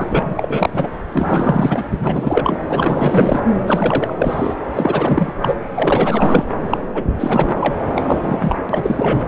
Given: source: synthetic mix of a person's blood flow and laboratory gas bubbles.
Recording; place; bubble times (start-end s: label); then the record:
Doppler ultrasound of blood flow; subclavian vein
0.00-0.06 s: bubbles
0.11-0.90 s: bubbles
1.13-2.59 s: bubbles
2.69-3.40 s: bubbles
3.67-4.13 s: bubbles
4.18-4.55 s: bubbles
4.76-5.33 s: bubbles
5.42-5.56 s: bubbles
5.74-6.45 s: bubbles
6.70-6.78 s: bubbles
6.94-7.04 s: bubbles
7.16-7.74 s: bubbles
7.95-8.55 s: bubbles
8.69-9.24 s: bubbles
From the record:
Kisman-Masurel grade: 343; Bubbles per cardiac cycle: rolling drumbeat, 9 or more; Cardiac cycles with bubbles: 100%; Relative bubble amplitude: loud (0.450 to 0.775); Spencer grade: 3 (all of the cardiac periods contain showers or single bubble signals, but not dominating or overriding the cardiac motion signals); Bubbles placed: anywhere in the cardiac cycle